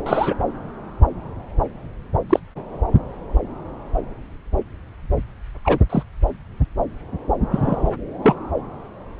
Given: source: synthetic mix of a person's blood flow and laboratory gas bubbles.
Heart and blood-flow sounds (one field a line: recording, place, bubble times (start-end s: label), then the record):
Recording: Doppler ultrasound of blood flow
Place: subclavian vein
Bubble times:
0.06-0.35 s: bubbles
2.29-2.40 s: bubbles
5.65-5.78 s: bubbles
5.89-6.03 s: bubbles
7.50-7.93 s: bubbles
8.22-8.34 s: bubbles
From the record:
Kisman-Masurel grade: 123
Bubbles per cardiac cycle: 1 to 2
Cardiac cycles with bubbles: 10 to 50%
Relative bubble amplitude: loud (0.450 to 0.775)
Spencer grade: 2 (many but less than half of the cardiac periods contain bubble signals, singularly or in groups)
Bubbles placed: anywhere in the cardiac cycle